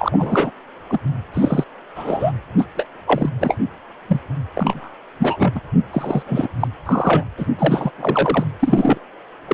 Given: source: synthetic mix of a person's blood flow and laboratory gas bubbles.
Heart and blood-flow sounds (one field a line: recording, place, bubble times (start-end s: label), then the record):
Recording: Doppler ultrasound of blood flow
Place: precordium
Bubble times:
0.00-0.51 s: bubbles
0.90-0.99 s: bubbles
1.33-1.64 s: bubbles
1.95-2.32 s: bubbles
2.58-2.65 s: bubbles
2.77-2.86 s: bubbles
3.06-3.29 s: bubbles
3.41-3.57 s: bubbles
4.08-4.21 s: bubbles
4.55-4.88 s: bubbles
5.19-5.60 s: bubbles
5.92-6.22 s: bubbles
6.26-6.49 s: bubbles
6.59-6.67 s: bubbles
6.85-7.23 s: bubbles
7.38-7.46 s: bubbles
7.58-7.91 s: bubbles
7.98-8.45 s: bubbles
8.60-8.98 s: bubbles
9.48-9.54 s: bubbles
From the record:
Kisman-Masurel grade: 242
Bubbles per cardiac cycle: several, 3 to 8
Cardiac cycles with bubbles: 100%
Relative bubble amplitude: moderate (0.250 to 0.450)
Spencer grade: 3 (all of the cardiac periods contain showers or single bubble signals, but not dominating or overriding the cardiac motion signals)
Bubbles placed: anywhere in the cardiac cycle